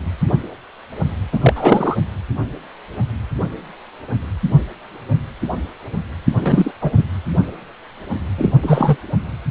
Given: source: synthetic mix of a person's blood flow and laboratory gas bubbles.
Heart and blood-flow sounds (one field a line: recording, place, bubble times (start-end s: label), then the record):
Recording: Doppler ultrasound of blood flow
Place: precordium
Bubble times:
1.32-1.98 s: bubbles
6.42-6.71 s: bubbles
6.82-6.92 s: bubbles
6.97-7.04 s: bubbles
8.38-8.52 s: bubbles
8.62-8.97 s: bubbles
From the record:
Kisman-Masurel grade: 223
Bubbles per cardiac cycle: several, 3 to 8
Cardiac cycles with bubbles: 10 to 50%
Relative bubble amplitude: loud (0.450 to 0.775)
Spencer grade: 2 (many but less than half of the cardiac periods contain bubble signals, singularly or in groups)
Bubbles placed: anywhere in the cardiac cycle